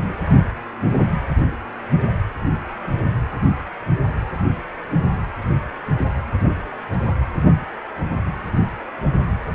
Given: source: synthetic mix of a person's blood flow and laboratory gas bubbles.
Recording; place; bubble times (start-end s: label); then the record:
Doppler ultrasound of blood flow; precordium
no bubbles
From the record:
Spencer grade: 0 (complete lack of bubble signals)